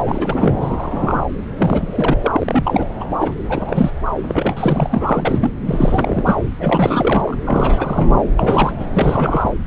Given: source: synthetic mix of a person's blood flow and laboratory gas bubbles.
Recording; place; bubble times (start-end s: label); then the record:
Doppler ultrasound of blood flow; subclavian vein
0.00-0.55 s: bubbles
0.60-1.27 s: bubbles
1.57-2.17 s: bubbles
2.21-2.87 s: bubbles
3.00-3.04 s: bubbles
3.20-3.35 s: bubbles
3.49-3.91 s: bubbles
4.27-5.51 s: bubbles
5.66-6.35 s: bubbles
6.60-7.35 s: bubbles
7.46-8.21 s: bubbles
8.37-8.72 s: bubbles
8.79-8.87 s: bubbles
8.94-9.53 s: bubbles
From the record:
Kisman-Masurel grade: 342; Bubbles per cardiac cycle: rolling drumbeat, 9 or more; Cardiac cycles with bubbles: 100%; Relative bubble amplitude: moderate (0.250 to 0.450); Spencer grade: 3 (all of the cardiac periods contain showers or single bubble signals, but not dominating or overriding the cardiac motion signals); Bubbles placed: anywhere in the cardiac cycle